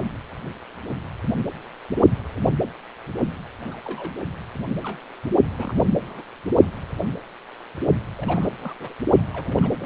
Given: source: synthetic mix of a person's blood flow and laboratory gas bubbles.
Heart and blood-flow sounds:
Doppler ultrasound of blood flow; precordium
3.65-3.77 s: bubbles
3.84-4.12 s: bubbles
4.83-4.99 s: bubbles
5.57-5.72 s: bubbles
5.75-5.84 s: bubbles
6.07-6.22 s: bubbles
8.18-8.49 s: bubbles
8.58-8.75 s: bubbles
8.79-8.93 s: bubbles
9.33-9.86 s: bubbles
From the record:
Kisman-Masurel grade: 221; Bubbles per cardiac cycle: several, 3 to 8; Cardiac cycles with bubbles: 10 to 50%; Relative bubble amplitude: barely perceptible (0.100 to 0.250); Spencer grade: 2 (many but less than half of the cardiac periods contain bubble signals, singularly or in groups); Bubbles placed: only in the low amplitude regions of the cardiac cycle

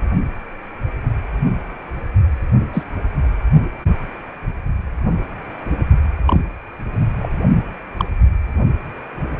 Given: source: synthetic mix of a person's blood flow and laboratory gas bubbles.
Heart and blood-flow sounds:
Doppler ultrasound of blood flow; precordium
2.74-2.83 s: bubbles
6.26-6.41 s: bubbles
7.19-7.29 s: bubbles
7.97-8.05 s: bubbles
From the record:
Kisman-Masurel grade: 122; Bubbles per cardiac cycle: 1 to 2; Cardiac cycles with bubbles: 10 to 50%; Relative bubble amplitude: moderate (0.250 to 0.450); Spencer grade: 2 (many but less than half of the cardiac periods contain bubble signals, singularly or in groups); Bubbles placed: only in the low amplitude regions of the cardiac cycle

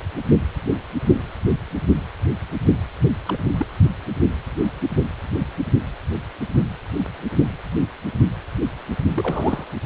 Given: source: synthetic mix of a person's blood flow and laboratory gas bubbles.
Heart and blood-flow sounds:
Doppler ultrasound of blood flow; precordium
3.26-3.38 s: bubbles
3.58-3.66 s: bubbles
9.15-9.65 s: bubbles
From the record:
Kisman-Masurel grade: 221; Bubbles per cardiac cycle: several, 3 to 8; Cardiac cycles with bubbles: 10 to 50%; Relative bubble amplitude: barely perceptible (0.100 to 0.250); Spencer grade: 2 (many but less than half of the cardiac periods contain bubble signals, singularly or in groups); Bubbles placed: only in the low amplitude regions of the cardiac cycle

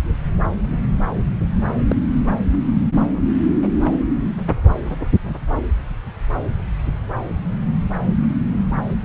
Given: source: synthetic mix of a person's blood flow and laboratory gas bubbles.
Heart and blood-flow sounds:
Doppler ultrasound of blood flow; subclavian vein
1.89-1.95 s: bubbles
From the record:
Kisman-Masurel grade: 112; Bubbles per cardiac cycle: 1 to 2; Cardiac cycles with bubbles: 1 to 10%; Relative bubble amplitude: moderate (0.250 to 0.450); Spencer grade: 1 (occasional bubble signal discernible with the cardiac motion signal, with majority of cardiac periods free of bubbles); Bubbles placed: anywhere in the cardiac cycle

